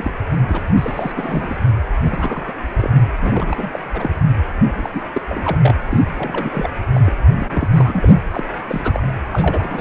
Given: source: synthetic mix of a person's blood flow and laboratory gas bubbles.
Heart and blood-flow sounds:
Doppler ultrasound of blood flow; precordium
0.00-0.14 s: bubbles
0.48-0.63 s: bubbles
0.76-1.12 s: bubbles
1.16-1.56 s: bubbles
2.04-2.53 s: bubbles
2.78-2.90 s: bubbles
2.94-3.04 s: bubbles
3.19-3.79 s: bubbles
3.94-4.10 s: bubbles
4.73-4.90 s: bubbles
4.94-5.03 s: bubbles
5.12-5.21 s: bubbles
5.29-5.58 s: bubbles
5.62-5.75 s: bubbles
5.91-6.69 s: bubbles
6.93-7.14 s: bubbles
7.39-7.69 s: bubbles
7.73-8.07 s: bubbles
8.30-8.43 s: bubbles
8.68-9.03 s: bubbles
9.31-9.81 s: bubbles
From the record:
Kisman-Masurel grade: 342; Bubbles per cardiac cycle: rolling drumbeat, 9 or more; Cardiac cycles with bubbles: 100%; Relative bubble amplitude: moderate (0.250 to 0.450); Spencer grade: 3 (all of the cardiac periods contain showers or single bubble signals, but not dominating or overriding the cardiac motion signals); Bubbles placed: anywhere in the cardiac cycle

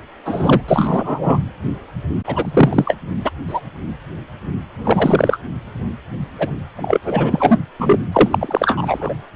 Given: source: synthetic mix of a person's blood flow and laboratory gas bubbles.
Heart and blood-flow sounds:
Doppler ultrasound of blood flow; precordium
0.25-0.61 s: bubbles
0.68-1.38 s: bubbles
2.26-2.96 s: bubbles
3.24-3.31 s: bubbles
3.47-3.60 s: bubbles
4.85-5.41 s: bubbles
6.38-6.50 s: bubbles
6.76-6.99 s: bubbles
7.04-7.58 s: bubbles
7.80-7.99 s: bubbles
8.12-9.14 s: bubbles
From the record:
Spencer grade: 3 (all of the cardiac periods contain showers or single bubble signals, but not dominating or overriding the cardiac motion signals); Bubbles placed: anywhere in the cardiac cycle

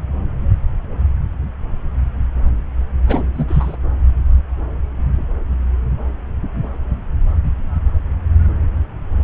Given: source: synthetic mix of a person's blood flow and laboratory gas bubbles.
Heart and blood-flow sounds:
Doppler ultrasound of blood flow; subclavian vein
3.07-3.24 s: bubbles
3.33-3.46 s: bubbles
3.48-3.78 s: bubbles
From the record:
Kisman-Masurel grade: 212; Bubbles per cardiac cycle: several, 3 to 8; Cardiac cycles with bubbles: 1 to 10%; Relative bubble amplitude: moderate (0.250 to 0.450); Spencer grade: 1 (occasional bubble signal discernible with the cardiac motion signal, with majority of cardiac periods free of bubbles); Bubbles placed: anywhere in the cardiac cycle

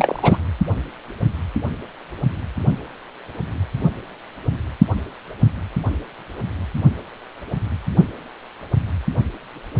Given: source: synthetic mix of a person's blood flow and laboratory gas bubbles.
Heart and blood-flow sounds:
Doppler ultrasound of blood flow; precordium
0.00-0.38 s: bubbles
From the record:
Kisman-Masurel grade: 213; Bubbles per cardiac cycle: several, 3 to 8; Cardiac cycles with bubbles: 1 to 10%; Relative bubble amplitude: loud (0.450 to 0.775); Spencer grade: 1 (occasional bubble signal discernible with the cardiac motion signal, with majority of cardiac periods free of bubbles); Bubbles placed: only in the low amplitude regions of the cardiac cycle

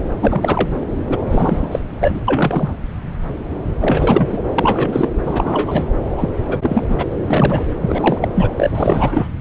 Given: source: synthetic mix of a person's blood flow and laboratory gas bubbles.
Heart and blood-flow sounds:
Doppler ultrasound of blood flow; subclavian vein
0.20-0.68 s: bubbles
1.09-1.18 s: bubbles
1.30-1.79 s: bubbles
2.00-2.21 s: bubbles
2.27-2.69 s: bubbles
3.80-4.42 s: bubbles
4.54-5.09 s: bubbles
5.26-5.85 s: bubbles
6.17-6.29 s: bubbles
6.47-6.59 s: bubbles
6.62-6.84 s: bubbles
6.88-7.05 s: bubbles
7.12-7.14 s: bubbles
7.26-7.66 s: bubbles
7.81-8.18 s: bubbles
8.21-8.29 s: bubbles
8.35-8.50 s: bubbles
8.57-9.28 s: bubbles
From the record:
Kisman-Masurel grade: 333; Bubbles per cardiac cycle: rolling drumbeat, 9 or more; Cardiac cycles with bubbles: 50 to 99%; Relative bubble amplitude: loud (0.450 to 0.775); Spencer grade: 3 (all of the cardiac periods contain showers or single bubble signals, but not dominating or overriding the cardiac motion signals); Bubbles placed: anywhere in the cardiac cycle

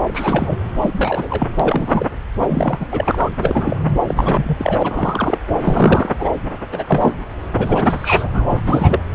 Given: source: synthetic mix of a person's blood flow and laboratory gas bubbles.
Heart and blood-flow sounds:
Doppler ultrasound of blood flow; subclavian vein
0.00-0.58 s: bubbles
0.82-1.49 s: bubbles
1.60-2.08 s: bubbles
2.39-2.85 s: bubbles
2.92-3.29 s: bubbles
3.41-3.81 s: bubbles
4.07-5.38 s: bubbles
5.61-6.12 s: bubbles
6.20-6.29 s: bubbles
6.71-6.84 s: bubbles
6.87-7.12 s: bubbles
7.53-8.62 s: bubbles
8.67-8.99 s: bubbles
From the record:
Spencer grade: 3 (all of the cardiac periods contain showers or single bubble signals, but not dominating or overriding the cardiac motion signals); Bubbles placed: anywhere in the cardiac cycle

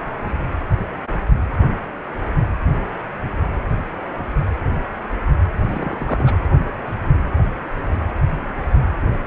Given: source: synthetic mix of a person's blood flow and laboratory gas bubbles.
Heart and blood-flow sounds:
Doppler ultrasound of blood flow; precordium
5.62-6.35 s: bubbles
From the record:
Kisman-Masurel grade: 211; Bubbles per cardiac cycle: several, 3 to 8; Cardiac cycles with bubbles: 1 to 10%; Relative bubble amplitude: barely perceptible (0.100 to 0.250); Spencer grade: 1 (occasional bubble signal discernible with the cardiac motion signal, with majority of cardiac periods free of bubbles); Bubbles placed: anywhere in the cardiac cycle

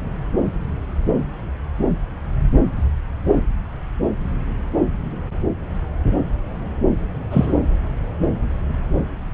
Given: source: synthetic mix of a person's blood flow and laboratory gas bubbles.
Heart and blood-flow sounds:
Doppler ultrasound of blood flow; subclavian vein
7.30-7.53 s: bubbles
From the record:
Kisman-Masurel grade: 113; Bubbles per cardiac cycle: 1 to 2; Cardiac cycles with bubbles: 1 to 10%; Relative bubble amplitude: loud (0.450 to 0.775); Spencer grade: 1 (occasional bubble signal discernible with the cardiac motion signal, with majority of cardiac periods free of bubbles); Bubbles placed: anywhere in the cardiac cycle

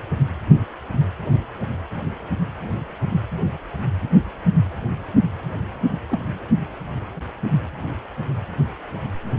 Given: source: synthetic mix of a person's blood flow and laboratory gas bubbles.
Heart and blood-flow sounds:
Doppler ultrasound of blood flow; precordium
6.08-6.20 s: bubbles
From the record:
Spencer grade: 1 (occasional bubble signal discernible with the cardiac motion signal, with majority of cardiac periods free of bubbles); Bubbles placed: only in the low amplitude regions of the cardiac cycle

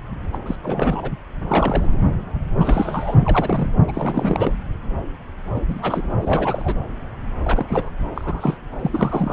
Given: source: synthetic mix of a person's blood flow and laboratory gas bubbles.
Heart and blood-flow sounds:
Doppler ultrasound of blood flow; subclavian vein
0.32-0.37 s: bubbles
0.45-0.55 s: bubbles
0.62-1.10 s: bubbles
1.47-1.97 s: bubbles
2.60-3.16 s: bubbles
3.20-3.70 s: bubbles
3.88-4.53 s: bubbles
5.54-5.62 s: bubbles
5.67-6.07 s: bubbles
6.21-6.75 s: bubbles
7.42-7.92 s: bubbles
8.15-8.58 s: bubbles
8.79-9.33 s: bubbles
From the record:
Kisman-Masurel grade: 332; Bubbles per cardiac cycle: rolling drumbeat, 9 or more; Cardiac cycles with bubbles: 50 to 99%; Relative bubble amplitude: moderate (0.250 to 0.450); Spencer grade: 3 (all of the cardiac periods contain showers or single bubble signals, but not dominating or overriding the cardiac motion signals); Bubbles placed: anywhere in the cardiac cycle

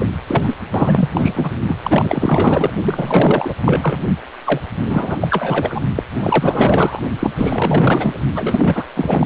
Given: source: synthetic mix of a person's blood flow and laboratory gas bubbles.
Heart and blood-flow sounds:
Doppler ultrasound of blood flow; precordium
0.00-0.09 s: bubbles
0.27-0.54 s: bubbles
0.74-1.08 s: bubbles
1.13-1.51 s: bubbles
1.68-1.76 s: bubbles
1.83-2.70 s: bubbles
2.81-3.54 s: bubbles
3.62-3.97 s: bubbles
4.46-4.61 s: bubbles
4.83-5.17 s: bubbles
5.21-5.84 s: bubbles
5.96-6.03 s: bubbles
6.15-7.01 s: bubbles
7.19-7.30 s: bubbles
7.36-8.19 s: bubbles
8.36-8.85 s: bubbles
8.96-9.26 s: bubbles
From the record:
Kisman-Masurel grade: 444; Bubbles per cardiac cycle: continuous sound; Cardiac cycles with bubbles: 100%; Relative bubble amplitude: maximal (0.775 to 0.999); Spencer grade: 4 (maximum detectable bubble signal sounding continuously throughout systole and diastole of every cardiac period, and overriding the amplitude of the normal cardiac signals); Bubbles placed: anywhere in the cardiac cycle

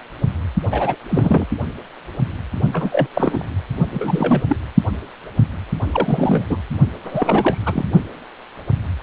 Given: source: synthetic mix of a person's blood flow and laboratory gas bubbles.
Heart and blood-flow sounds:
Doppler ultrasound of blood flow; precordium
0.71-0.96 s: bubbles
1.09-1.46 s: bubbles
2.73-3.08 s: bubbles
3.13-3.46 s: bubbles
3.91-4.42 s: bubbles
4.49-4.57 s: bubbles
5.92-6.44 s: bubbles
6.50-6.57 s: bubbles
7.04-7.85 s: bubbles
From the record:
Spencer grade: 3 (all of the cardiac periods contain showers or single bubble signals, but not dominating or overriding the cardiac motion signals); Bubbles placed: only in the low amplitude regions of the cardiac cycle

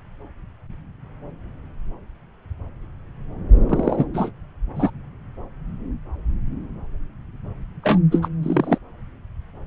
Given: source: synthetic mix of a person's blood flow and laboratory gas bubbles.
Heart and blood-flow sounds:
Doppler ultrasound of blood flow; subclavian vein
3.69-4.05 s: bubbles
4.14-4.31 s: bubbles
4.75-4.91 s: bubbles
7.84-7.99 s: bubbles
8.12-8.20 s: bubbles
8.22-8.29 s: bubbles
8.43-8.78 s: bubbles
From the record:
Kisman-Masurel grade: 222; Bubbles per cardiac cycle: several, 3 to 8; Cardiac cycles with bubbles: 10 to 50%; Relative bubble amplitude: moderate (0.250 to 0.450); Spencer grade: 2 (many but less than half of the cardiac periods contain bubble signals, singularly or in groups); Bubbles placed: anywhere in the cardiac cycle

